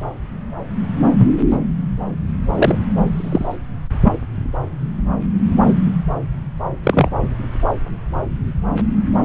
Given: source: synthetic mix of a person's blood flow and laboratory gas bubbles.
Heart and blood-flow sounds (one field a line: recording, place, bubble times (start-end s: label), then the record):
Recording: Doppler ultrasound of blood flow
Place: subclavian vein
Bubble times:
1.17-1.31 s: bubbles
2.54-2.75 s: bubbles
3.12-3.56 s: bubbles
4.04-4.12 s: bubbles
6.83-7.09 s: bubbles
From the record:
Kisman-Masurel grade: 123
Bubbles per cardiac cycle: 1 to 2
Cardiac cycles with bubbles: 10 to 50%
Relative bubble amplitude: loud (0.450 to 0.775)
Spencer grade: 2 (many but less than half of the cardiac periods contain bubble signals, singularly or in groups)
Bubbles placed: anywhere in the cardiac cycle